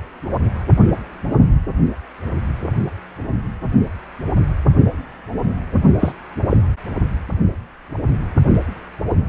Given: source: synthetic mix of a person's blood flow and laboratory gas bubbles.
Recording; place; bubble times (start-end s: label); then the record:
Doppler ultrasound of blood flow; precordium
6.00-6.12 s: bubbles
6.50-6.58 s: bubbles
From the record:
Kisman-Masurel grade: 113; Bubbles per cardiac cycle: 1 to 2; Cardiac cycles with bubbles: 1 to 10%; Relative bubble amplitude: loud (0.450 to 0.775); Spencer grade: 1 (occasional bubble signal discernible with the cardiac motion signal, with majority of cardiac periods free of bubbles); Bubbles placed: only in the low amplitude regions of the cardiac cycle